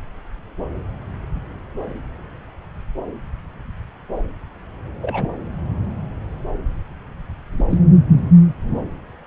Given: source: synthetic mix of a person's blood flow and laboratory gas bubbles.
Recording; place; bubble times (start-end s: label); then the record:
Doppler ultrasound of blood flow; subclavian vein
5.02-5.30 s: bubbles
7.58-7.64 s: bubbles
7.70-7.78 s: bubbles
From the record:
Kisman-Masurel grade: 121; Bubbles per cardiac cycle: 1 to 2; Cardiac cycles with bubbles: 10 to 50%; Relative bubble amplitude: barely perceptible (0.100 to 0.250); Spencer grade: 2 (many but less than half of the cardiac periods contain bubble signals, singularly or in groups); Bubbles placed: anywhere in the cardiac cycle